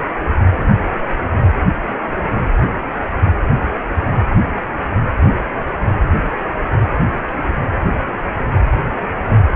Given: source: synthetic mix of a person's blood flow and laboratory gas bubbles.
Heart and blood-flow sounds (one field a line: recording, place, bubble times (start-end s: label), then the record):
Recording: Doppler ultrasound of blood flow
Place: precordium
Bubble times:
7.28-7.33 s: bubbles
From the record:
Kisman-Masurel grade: 111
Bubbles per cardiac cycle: 1 to 2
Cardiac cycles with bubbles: 1 to 10%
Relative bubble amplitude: barely perceptible (0.100 to 0.250)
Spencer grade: 1 (occasional bubble signal discernible with the cardiac motion signal, with majority of cardiac periods free of bubbles)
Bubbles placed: only in the low amplitude regions of the cardiac cycle